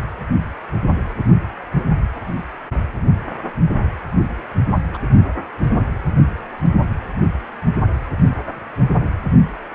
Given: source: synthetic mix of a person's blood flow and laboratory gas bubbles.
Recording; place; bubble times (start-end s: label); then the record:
Doppler ultrasound of blood flow; precordium
4.93-4.98 s: bubbles
From the record:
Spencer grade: 1 (occasional bubble signal discernible with the cardiac motion signal, with majority of cardiac periods free of bubbles); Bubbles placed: anywhere in the cardiac cycle